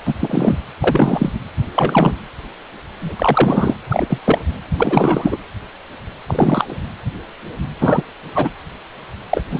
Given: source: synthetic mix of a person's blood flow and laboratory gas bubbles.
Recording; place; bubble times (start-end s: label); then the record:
Doppler ultrasound of blood flow; precordium
0.06-0.13 s: bubbles
0.19-0.59 s: bubbles
0.81-1.32 s: bubbles
1.76-2.15 s: bubbles
3.00-3.75 s: bubbles
3.90-4.06 s: bubbles
4.09-4.19 s: bubbles
4.25-4.38 s: bubbles
4.77-5.37 s: bubbles
6.28-6.78 s: bubbles
7.81-8.02 s: bubbles
8.34-8.48 s: bubbles
9.29-9.43 s: bubbles
9.50-9.60 s: bubbles
From the record:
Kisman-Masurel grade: 233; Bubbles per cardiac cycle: several, 3 to 8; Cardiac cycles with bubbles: 50 to 99%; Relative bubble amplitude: loud (0.450 to 0.775); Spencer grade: 3 (all of the cardiac periods contain showers or single bubble signals, but not dominating or overriding the cardiac motion signals); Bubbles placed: anywhere in the cardiac cycle